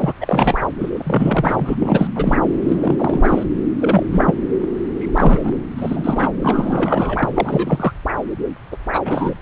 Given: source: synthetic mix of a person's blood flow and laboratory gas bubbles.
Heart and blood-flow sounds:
Doppler ultrasound of blood flow; subclavian vein
0.00-0.13 s: bubbles
0.21-0.68 s: bubbles
0.80-1.75 s: bubbles
1.79-2.07 s: bubbles
2.15-2.38 s: bubbles
2.67-3.44 s: bubbles
3.80-4.06 s: bubbles
4.11-4.36 s: bubbles
4.99-5.52 s: bubbles
5.77-6.27 s: bubbles
6.42-7.29 s: bubbles
7.34-7.93 s: bubbles
8.72-8.76 s: bubbles
8.92-9.01 s: bubbles
9.05-9.34 s: bubbles
From the record:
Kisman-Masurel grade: 343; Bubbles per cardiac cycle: rolling drumbeat, 9 or more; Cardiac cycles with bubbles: 100%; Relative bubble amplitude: loud (0.450 to 0.775); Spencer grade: 3 (all of the cardiac periods contain showers or single bubble signals, but not dominating or overriding the cardiac motion signals); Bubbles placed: anywhere in the cardiac cycle

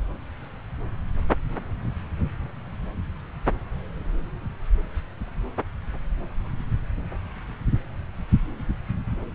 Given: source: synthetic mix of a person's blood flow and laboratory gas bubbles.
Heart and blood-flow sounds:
Doppler ultrasound of blood flow; subclavian vein
no bubbles
From the record:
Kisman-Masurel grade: 000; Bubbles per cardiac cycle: 0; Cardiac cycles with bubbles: 0%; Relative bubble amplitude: no bubbles discernible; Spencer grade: 0 (complete lack of bubble signals)

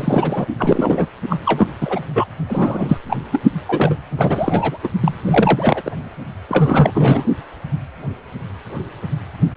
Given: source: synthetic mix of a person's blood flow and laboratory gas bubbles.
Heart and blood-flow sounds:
Doppler ultrasound of blood flow; precordium
0.00-0.46 s: bubbles
0.58-1.06 s: bubbles
1.29-1.38 s: bubbles
1.45-1.67 s: bubbles
1.81-2.00 s: bubbles
2.15-2.25 s: bubbles
2.48-3.00 s: bubbles
3.09-3.17 s: bubbles
3.31-3.40 s: bubbles
3.68-3.96 s: bubbles
4.17-4.78 s: bubbles
4.83-4.88 s: bubbles
5.01-5.17 s: bubbles
5.25-5.91 s: bubbles
6.49-7.24 s: bubbles
From the record:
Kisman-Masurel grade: 333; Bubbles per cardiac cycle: rolling drumbeat, 9 or more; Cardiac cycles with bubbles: 50 to 99%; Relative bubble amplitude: loud (0.450 to 0.775); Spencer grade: 3 (all of the cardiac periods contain showers or single bubble signals, but not dominating or overriding the cardiac motion signals); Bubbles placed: only in the low amplitude regions of the cardiac cycle

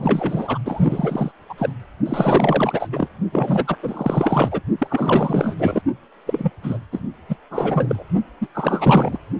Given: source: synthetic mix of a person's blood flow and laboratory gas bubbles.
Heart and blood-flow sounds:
Doppler ultrasound of blood flow; precordium
0.00-0.58 s: bubbles
0.65-1.32 s: bubbles
1.49-1.55 s: bubbles
1.58-1.73 s: bubbles
2.06-2.88 s: bubbles
2.92-3.08 s: bubbles
3.32-3.76 s: bubbles
3.82-4.61 s: bubbles
4.78-5.55 s: bubbles
5.58-5.82 s: bubbles
6.26-6.50 s: bubbles
6.63-6.79 s: bubbles
6.92-7.00 s: bubbles
7.29-7.36 s: bubbles
7.50-8.04 s: bubbles
8.41-8.47 s: bubbles
8.54-9.18 s: bubbles
From the record:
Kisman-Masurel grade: 444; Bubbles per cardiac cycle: continuous sound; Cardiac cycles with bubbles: 100%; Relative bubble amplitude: maximal (0.775 to 0.999); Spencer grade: 4 (maximum detectable bubble signal sounding continuously throughout systole and diastole of every cardiac period, and overriding the amplitude of the normal cardiac signals); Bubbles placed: only in the low amplitude regions of the cardiac cycle

